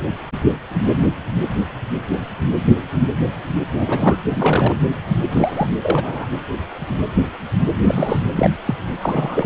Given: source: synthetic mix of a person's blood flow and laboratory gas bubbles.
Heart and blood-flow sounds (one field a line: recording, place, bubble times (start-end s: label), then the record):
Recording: Doppler ultrasound of blood flow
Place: precordium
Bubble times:
3.73-4.16 s: bubbles
4.26-4.74 s: bubbles
5.30-5.70 s: bubbles
5.81-6.27 s: bubbles
7.79-8.20 s: bubbles
8.32-8.50 s: bubbles
8.66-8.75 s: bubbles
9.02-9.46 s: bubbles
From the record:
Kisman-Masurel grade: 222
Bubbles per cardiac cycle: several, 3 to 8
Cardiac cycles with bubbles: 10 to 50%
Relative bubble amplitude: moderate (0.250 to 0.450)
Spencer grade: 2 (many but less than half of the cardiac periods contain bubble signals, singularly or in groups)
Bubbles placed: anywhere in the cardiac cycle